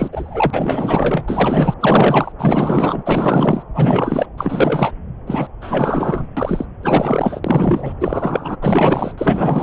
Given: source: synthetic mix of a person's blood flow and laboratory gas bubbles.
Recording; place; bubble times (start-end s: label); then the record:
Doppler ultrasound of blood flow; subclavian vein
0.00-0.10 s: bubbles
0.12-1.25 s: bubbles
1.28-1.74 s: bubbles
1.80-2.32 s: bubbles
2.38-3.02 s: bubbles
3.05-3.63 s: bubbles
3.74-4.27 s: bubbles
4.38-4.92 s: bubbles
5.27-5.47 s: bubbles
5.61-6.25 s: bubbles
6.37-6.66 s: bubbles
6.83-7.40 s: bubbles
7.44-7.93 s: bubbles
8.00-8.56 s: bubbles
8.62-9.13 s: bubbles
9.17-9.63 s: bubbles
From the record:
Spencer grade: 4 (maximum detectable bubble signal sounding continuously throughout systole and diastole of every cardiac period, and overriding the amplitude of the normal cardiac signals); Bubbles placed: anywhere in the cardiac cycle